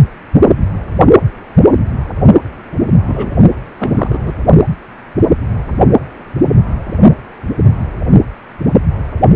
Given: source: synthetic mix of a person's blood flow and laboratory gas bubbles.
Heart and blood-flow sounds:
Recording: Doppler ultrasound of blood flow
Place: precordium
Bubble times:
3.06-3.31 s: bubbles
3.78-4.20 s: bubbles
4.23-4.34 s: bubbles
From the record:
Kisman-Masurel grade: 212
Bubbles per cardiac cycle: several, 3 to 8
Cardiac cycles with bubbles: 1 to 10%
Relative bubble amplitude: moderate (0.250 to 0.450)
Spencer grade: 1 (occasional bubble signal discernible with the cardiac motion signal, with majority of cardiac periods free of bubbles)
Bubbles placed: only in the low amplitude regions of the cardiac cycle

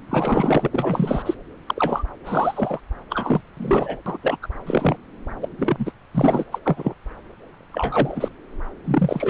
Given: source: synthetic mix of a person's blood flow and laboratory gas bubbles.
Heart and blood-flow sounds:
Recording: Doppler ultrasound of blood flow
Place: subclavian vein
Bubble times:
0.10-0.68 s: bubbles
0.71-1.35 s: bubbles
1.67-2.03 s: bubbles
2.24-2.80 s: bubbles
3.10-3.41 s: bubbles
3.57-3.98 s: bubbles
4.06-4.17 s: bubbles
4.22-4.37 s: bubbles
4.42-4.48 s: bubbles
4.66-4.97 s: bubbles
5.42-5.48 s: bubbles
5.58-5.92 s: bubbles
6.14-6.45 s: bubbles
6.52-6.58 s: bubbles
6.65-6.94 s: bubbles
7.72-8.29 s: bubbles
8.84-9.29 s: bubbles
From the record:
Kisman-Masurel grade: 242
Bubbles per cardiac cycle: several, 3 to 8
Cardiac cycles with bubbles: 100%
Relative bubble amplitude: moderate (0.250 to 0.450)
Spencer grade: 3 (all of the cardiac periods contain showers or single bubble signals, but not dominating or overriding the cardiac motion signals)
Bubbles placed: anywhere in the cardiac cycle

